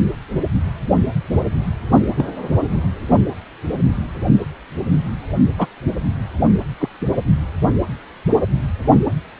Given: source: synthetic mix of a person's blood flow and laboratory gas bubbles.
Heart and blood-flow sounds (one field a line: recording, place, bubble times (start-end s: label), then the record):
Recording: Doppler ultrasound of blood flow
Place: precordium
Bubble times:
2.17-2.25 s: bubbles
5.58-5.67 s: bubbles
6.80-6.89 s: bubbles
From the record:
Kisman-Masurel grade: 123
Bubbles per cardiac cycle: 1 to 2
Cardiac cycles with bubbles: 10 to 50%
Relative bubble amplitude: loud (0.450 to 0.775)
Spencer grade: 2 (many but less than half of the cardiac periods contain bubble signals, singularly or in groups)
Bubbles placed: only in the low amplitude regions of the cardiac cycle